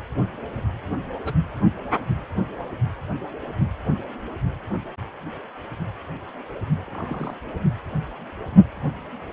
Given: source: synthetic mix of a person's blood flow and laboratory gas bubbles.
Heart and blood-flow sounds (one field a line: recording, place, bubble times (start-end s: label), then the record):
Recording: Doppler ultrasound of blood flow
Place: precordium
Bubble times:
1.24-1.34 s: bubbles
6.87-7.36 s: bubbles
From the record:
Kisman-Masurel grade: 121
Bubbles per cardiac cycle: 1 to 2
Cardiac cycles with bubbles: 10 to 50%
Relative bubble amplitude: barely perceptible (0.100 to 0.250)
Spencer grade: 2 (many but less than half of the cardiac periods contain bubble signals, singularly or in groups)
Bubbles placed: only in the low amplitude regions of the cardiac cycle